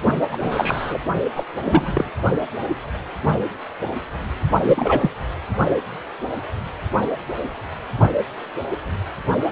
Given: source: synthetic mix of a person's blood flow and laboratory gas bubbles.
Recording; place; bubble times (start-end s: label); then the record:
Doppler ultrasound of blood flow; precordium
0.31-0.98 s: bubbles
1.36-1.44 s: bubbles
1.63-2.09 s: bubbles
4.63-5.10 s: bubbles
From the record:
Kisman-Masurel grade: 223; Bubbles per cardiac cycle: several, 3 to 8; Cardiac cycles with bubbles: 10 to 50%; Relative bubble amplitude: loud (0.450 to 0.775); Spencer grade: 2 (many but less than half of the cardiac periods contain bubble signals, singularly or in groups); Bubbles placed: only in the low amplitude regions of the cardiac cycle